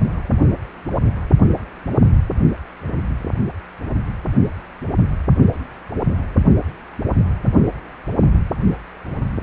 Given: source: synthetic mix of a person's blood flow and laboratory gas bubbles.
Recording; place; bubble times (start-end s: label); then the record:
Doppler ultrasound of blood flow; precordium
no bubbles
From the record:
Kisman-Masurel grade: 000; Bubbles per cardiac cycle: 0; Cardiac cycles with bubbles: 0%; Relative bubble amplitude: no bubbles discernible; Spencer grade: 0 (complete lack of bubble signals)